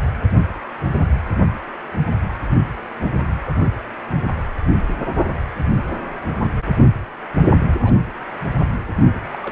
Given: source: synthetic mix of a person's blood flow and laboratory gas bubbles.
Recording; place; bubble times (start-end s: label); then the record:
Doppler ultrasound of blood flow; precordium
7.83-7.93 s: bubbles
9.33-9.37 s: bubbles
9.42-9.52 s: bubbles
From the record:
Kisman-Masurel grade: 121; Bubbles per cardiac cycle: 1 to 2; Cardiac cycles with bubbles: 10 to 50%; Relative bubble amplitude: barely perceptible (0.100 to 0.250); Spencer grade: 2 (many but less than half of the cardiac periods contain bubble signals, singularly or in groups); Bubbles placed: anywhere in the cardiac cycle